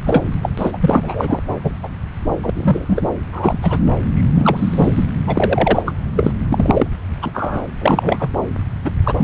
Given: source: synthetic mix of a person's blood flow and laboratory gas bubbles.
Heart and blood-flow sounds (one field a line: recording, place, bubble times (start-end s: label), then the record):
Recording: Doppler ultrasound of blood flow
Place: subclavian vein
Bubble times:
0.06-0.35 s: bubbles
0.42-0.50 s: bubbles
0.58-0.77 s: bubbles
0.80-1.40 s: bubbles
1.64-1.72 s: bubbles
1.82-1.89 s: bubbles
2.43-2.50 s: bubbles
2.54-3.07 s: bubbles
3.33-3.58 s: bubbles
3.62-3.78 s: bubbles
4.14-5.05 s: bubbles
5.27-5.83 s: bubbles
5.86-5.94 s: bubbles
6.16-6.33 s: bubbles
6.50-6.87 s: bubbles
7.22-7.31 s: bubbles
7.34-7.62 s: bubbles
7.81-8.29 s: bubbles
8.85-8.90 s: bubbles
9.04-9.13 s: bubbles
9.18-9.24 s: bubbles
From the record:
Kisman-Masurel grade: 243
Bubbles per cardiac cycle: several, 3 to 8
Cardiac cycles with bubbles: 100%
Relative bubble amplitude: loud (0.450 to 0.775)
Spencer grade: 3 (all of the cardiac periods contain showers or single bubble signals, but not dominating or overriding the cardiac motion signals)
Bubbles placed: anywhere in the cardiac cycle